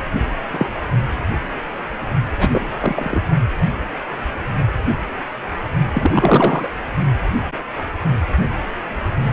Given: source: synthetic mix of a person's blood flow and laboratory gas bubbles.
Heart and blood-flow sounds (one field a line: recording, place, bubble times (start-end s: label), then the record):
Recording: Doppler ultrasound of blood flow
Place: precordium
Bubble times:
0.00-0.02 s: bubbles
0.51-0.70 s: bubbles
2.38-2.49 s: bubbles
2.52-2.69 s: bubbles
2.79-3.22 s: bubbles
5.93-6.68 s: bubbles
From the record:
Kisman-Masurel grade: 223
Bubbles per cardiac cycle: several, 3 to 8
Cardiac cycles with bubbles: 10 to 50%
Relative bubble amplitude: loud (0.450 to 0.775)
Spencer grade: 2 (many but less than half of the cardiac periods contain bubble signals, singularly or in groups)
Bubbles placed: only in the low amplitude regions of the cardiac cycle